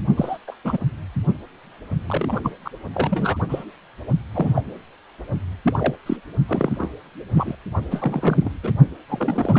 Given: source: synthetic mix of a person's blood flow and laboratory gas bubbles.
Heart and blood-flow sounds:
Doppler ultrasound of blood flow; precordium
0.16-0.38 s: bubbles
0.48-0.55 s: bubbles
0.65-0.77 s: bubbles
2.07-2.51 s: bubbles
2.65-2.70 s: bubbles
2.94-3.37 s: bubbles
3.48-3.64 s: bubbles
4.33-4.64 s: bubbles
5.65-5.96 s: bubbles
6.06-6.17 s: bubbles
6.46-6.89 s: bubbles
7.34-7.56 s: bubbles
7.91-8.51 s: bubbles
8.63-8.73 s: bubbles
9.09-9.59 s: bubbles
From the record:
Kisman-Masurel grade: 242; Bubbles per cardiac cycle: several, 3 to 8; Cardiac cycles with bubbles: 100%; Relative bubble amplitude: moderate (0.250 to 0.450); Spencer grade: 3 (all of the cardiac periods contain showers or single bubble signals, but not dominating or overriding the cardiac motion signals); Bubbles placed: only in the low amplitude regions of the cardiac cycle

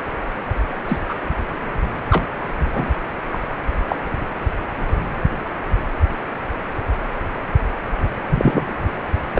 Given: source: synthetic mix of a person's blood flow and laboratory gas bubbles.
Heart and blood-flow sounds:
Doppler ultrasound of blood flow; precordium
0.88-1.01 s: bubbles
1.08-1.15 s: bubbles
2.09-2.25 s: bubbles
2.64-2.99 s: bubbles
3.33-3.38 s: bubbles
3.88-3.96 s: bubbles
8.34-8.66 s: bubbles
9.35-9.40 s: bubbles
From the record:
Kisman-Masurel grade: 123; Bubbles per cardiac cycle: 1 to 2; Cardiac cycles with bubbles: 10 to 50%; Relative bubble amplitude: loud (0.450 to 0.775); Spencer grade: 2 (many but less than half of the cardiac periods contain bubble signals, singularly or in groups); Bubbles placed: anywhere in the cardiac cycle

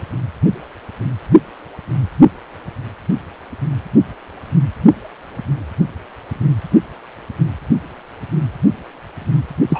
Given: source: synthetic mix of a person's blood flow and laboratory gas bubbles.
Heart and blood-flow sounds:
Doppler ultrasound of blood flow; precordium
9.69-9.80 s: bubbles
From the record:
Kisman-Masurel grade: 212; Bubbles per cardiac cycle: several, 3 to 8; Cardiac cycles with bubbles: 1 to 10%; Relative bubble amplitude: moderate (0.250 to 0.450); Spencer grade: 1 (occasional bubble signal discernible with the cardiac motion signal, with majority of cardiac periods free of bubbles); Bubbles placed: only in the low amplitude regions of the cardiac cycle

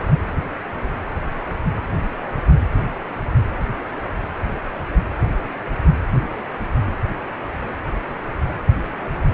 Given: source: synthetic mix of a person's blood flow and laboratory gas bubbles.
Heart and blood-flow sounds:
Doppler ultrasound of blood flow; precordium
0.00-0.20 s: bubbles
From the record:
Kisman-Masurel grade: 211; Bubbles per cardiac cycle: several, 3 to 8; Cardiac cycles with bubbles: 1 to 10%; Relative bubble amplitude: barely perceptible (0.100 to 0.250); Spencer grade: 1 (occasional bubble signal discernible with the cardiac motion signal, with majority of cardiac periods free of bubbles); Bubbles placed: anywhere in the cardiac cycle

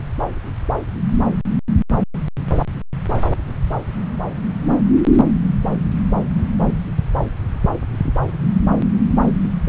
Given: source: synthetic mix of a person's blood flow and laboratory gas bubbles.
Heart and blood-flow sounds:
Doppler ultrasound of blood flow; subclavian vein
no bubbles
From the record:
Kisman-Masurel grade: 000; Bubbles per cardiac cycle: 0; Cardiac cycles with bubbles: 0%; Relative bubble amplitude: no bubbles discernible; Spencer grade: 0 (complete lack of bubble signals)

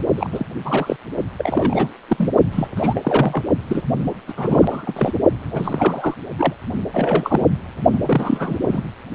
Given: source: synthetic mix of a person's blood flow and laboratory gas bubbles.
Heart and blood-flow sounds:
Doppler ultrasound of blood flow; precordium
0.17-0.30 s: bubbles
0.32-0.46 s: bubbles
0.65-0.96 s: bubbles
1.39-1.96 s: bubbles
2.08-2.32 s: bubbles
2.52-2.67 s: bubbles
2.75-3.42 s: bubbles
3.67-3.82 s: bubbles
4.28-4.33 s: bubbles
4.37-5.12 s: bubbles
5.44-6.14 s: bubbles
6.38-6.54 s: bubbles
6.94-7.47 s: bubbles
7.90-8.56 s: bubbles
8.61-8.83 s: bubbles
From the record:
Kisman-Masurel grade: 342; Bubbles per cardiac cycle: rolling drumbeat, 9 or more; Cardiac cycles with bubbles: 100%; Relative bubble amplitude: moderate (0.250 to 0.450); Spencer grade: 3 (all of the cardiac periods contain showers or single bubble signals, but not dominating or overriding the cardiac motion signals); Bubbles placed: only in the low amplitude regions of the cardiac cycle

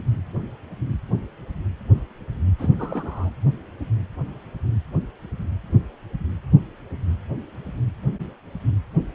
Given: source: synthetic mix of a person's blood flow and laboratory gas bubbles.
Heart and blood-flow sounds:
Doppler ultrasound of blood flow; precordium
2.58-2.71 s: bubbles
2.78-3.30 s: bubbles
From the record:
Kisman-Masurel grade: 211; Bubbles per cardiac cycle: several, 3 to 8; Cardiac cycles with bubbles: 1 to 10%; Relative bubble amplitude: barely perceptible (0.100 to 0.250); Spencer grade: 1 (occasional bubble signal discernible with the cardiac motion signal, with majority of cardiac periods free of bubbles); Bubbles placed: anywhere in the cardiac cycle

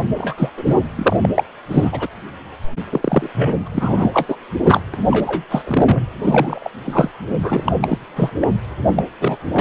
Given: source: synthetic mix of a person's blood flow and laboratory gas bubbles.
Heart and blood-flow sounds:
Doppler ultrasound of blood flow; precordium
0.18-0.33 s: bubbles
0.36-0.50 s: bubbles
0.56-0.75 s: bubbles
0.95-1.17 s: bubbles
1.22-1.29 s: bubbles
1.34-1.44 s: bubbles
1.69-2.07 s: bubbles
2.92-3.29 s: bubbles
3.34-3.68 s: bubbles
3.73-4.37 s: bubbles
4.66-4.82 s: bubbles
4.94-4.97 s: bubbles
5.11-5.44 s: bubbles
5.50-6.04 s: bubbles
6.22-6.69 s: bubbles
6.84-7.10 s: bubbles
7.42-7.74 s: bubbles
7.81-7.98 s: bubbles
8.15-8.30 s: bubbles
8.40-8.48 s: bubbles
8.96-9.05 s: bubbles
9.20-9.37 s: bubbles
9.52-9.61 s: bubbles
From the record:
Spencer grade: 3 (all of the cardiac periods contain showers or single bubble signals, but not dominating or overriding the cardiac motion signals); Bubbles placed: anywhere in the cardiac cycle

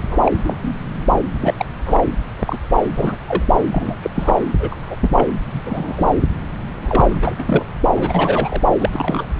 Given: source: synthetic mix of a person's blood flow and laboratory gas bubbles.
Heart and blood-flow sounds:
Doppler ultrasound of blood flow; subclavian vein
0.00-0.32 s: bubbles
0.44-0.55 s: bubbles
0.60-0.77 s: bubbles
1.40-1.54 s: bubbles
1.57-1.66 s: bubbles
1.86-2.04 s: bubbles
2.39-2.58 s: bubbles
2.95-3.17 s: bubbles
3.27-3.43 s: bubbles
3.72-3.96 s: bubbles
4.02-4.10 s: bubbles
4.14-4.38 s: bubbles
4.59-4.96 s: bubbles
4.99-5.27 s: bubbles
5.53-6.11 s: bubbles
6.72-7.18 s: bubbles
7.21-7.34 s: bubbles
7.38-7.66 s: bubbles
7.95-8.62 s: bubbles
8.79-9.28 s: bubbles
9.34-9.40 s: bubbles
From the record:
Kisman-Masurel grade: 242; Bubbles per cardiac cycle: several, 3 to 8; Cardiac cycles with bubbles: 100%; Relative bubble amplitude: moderate (0.250 to 0.450); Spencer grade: 3 (all of the cardiac periods contain showers or single bubble signals, but not dominating or overriding the cardiac motion signals); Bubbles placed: anywhere in the cardiac cycle

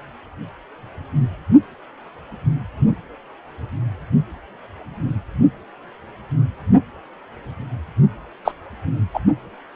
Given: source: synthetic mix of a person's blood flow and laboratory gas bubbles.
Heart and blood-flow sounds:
Doppler ultrasound of blood flow; precordium
8.45-8.52 s: bubbles
9.13-9.20 s: bubbles
From the record:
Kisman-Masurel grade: 113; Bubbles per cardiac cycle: 1 to 2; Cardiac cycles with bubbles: 1 to 10%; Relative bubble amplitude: loud (0.450 to 0.775); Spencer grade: 1 (occasional bubble signal discernible with the cardiac motion signal, with majority of cardiac periods free of bubbles); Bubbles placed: only in the low amplitude regions of the cardiac cycle

